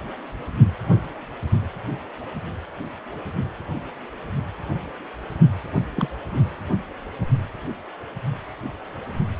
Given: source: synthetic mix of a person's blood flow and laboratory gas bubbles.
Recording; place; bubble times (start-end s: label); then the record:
Doppler ultrasound of blood flow; precordium
5.96-6.08 s: bubbles
6.31-6.39 s: bubbles
From the record:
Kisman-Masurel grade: 212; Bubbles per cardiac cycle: several, 3 to 8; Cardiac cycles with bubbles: 1 to 10%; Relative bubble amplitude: moderate (0.250 to 0.450); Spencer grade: 1 (occasional bubble signal discernible with the cardiac motion signal, with majority of cardiac periods free of bubbles); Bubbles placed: anywhere in the cardiac cycle